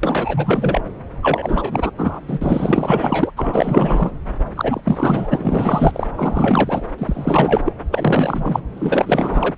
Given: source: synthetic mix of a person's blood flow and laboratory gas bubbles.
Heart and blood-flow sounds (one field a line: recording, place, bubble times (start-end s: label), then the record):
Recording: Doppler ultrasound of blood flow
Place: subclavian vein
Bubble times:
0.03-0.82 s: bubbles
1.21-1.91 s: bubbles
1.97-2.21 s: bubbles
2.27-3.31 s: bubbles
3.36-4.12 s: bubbles
4.55-4.80 s: bubbles
4.83-6.08 s: bubbles
6.16-6.84 s: bubbles
6.97-7.61 s: bubbles
7.64-7.74 s: bubbles
7.91-8.62 s: bubbles
8.77-9.54 s: bubbles
From the record:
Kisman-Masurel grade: 444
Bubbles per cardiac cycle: continuous sound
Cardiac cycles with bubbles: 100%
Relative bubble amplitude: maximal (0.775 to 0.999)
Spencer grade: 4 (maximum detectable bubble signal sounding continuously throughout systole and diastole of every cardiac period, and overriding the amplitude of the normal cardiac signals)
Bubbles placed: anywhere in the cardiac cycle